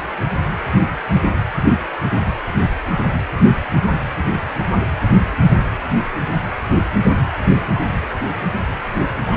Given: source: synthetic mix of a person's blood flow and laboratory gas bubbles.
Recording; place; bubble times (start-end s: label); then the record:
Doppler ultrasound of blood flow; precordium
9.24-9.37 s: bubbles
From the record:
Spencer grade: 1 (occasional bubble signal discernible with the cardiac motion signal, with majority of cardiac periods free of bubbles); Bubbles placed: anywhere in the cardiac cycle